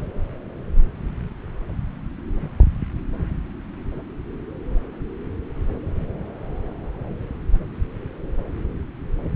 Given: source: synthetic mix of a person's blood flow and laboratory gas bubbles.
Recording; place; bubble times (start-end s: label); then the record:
Doppler ultrasound of blood flow; subclavian vein
no bubbles
From the record:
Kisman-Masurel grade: 000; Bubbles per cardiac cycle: 0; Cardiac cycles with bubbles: 0%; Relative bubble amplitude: no bubbles discernible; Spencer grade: 0 (complete lack of bubble signals)